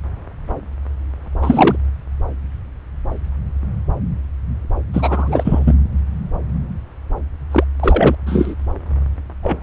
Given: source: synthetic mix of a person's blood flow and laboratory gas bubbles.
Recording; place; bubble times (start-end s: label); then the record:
Doppler ultrasound of blood flow; subclavian vein
1.42-1.76 s: bubbles
4.93-5.74 s: bubbles
7.51-7.64 s: bubbles
7.79-8.15 s: bubbles
8.26-8.54 s: bubbles
9.43-9.56 s: bubbles
From the record:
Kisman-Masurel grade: 223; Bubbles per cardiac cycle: several, 3 to 8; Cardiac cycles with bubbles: 10 to 50%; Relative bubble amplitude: loud (0.450 to 0.775); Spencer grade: 2 (many but less than half of the cardiac periods contain bubble signals, singularly or in groups); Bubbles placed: anywhere in the cardiac cycle